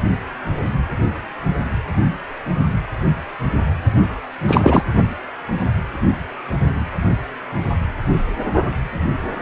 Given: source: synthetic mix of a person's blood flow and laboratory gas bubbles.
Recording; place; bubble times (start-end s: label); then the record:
Doppler ultrasound of blood flow; precordium
4.48-4.83 s: bubbles
From the record:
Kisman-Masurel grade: 223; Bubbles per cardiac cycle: several, 3 to 8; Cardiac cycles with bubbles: 10 to 50%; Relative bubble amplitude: loud (0.450 to 0.775); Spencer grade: 2 (many but less than half of the cardiac periods contain bubble signals, singularly or in groups); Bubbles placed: only in the low amplitude regions of the cardiac cycle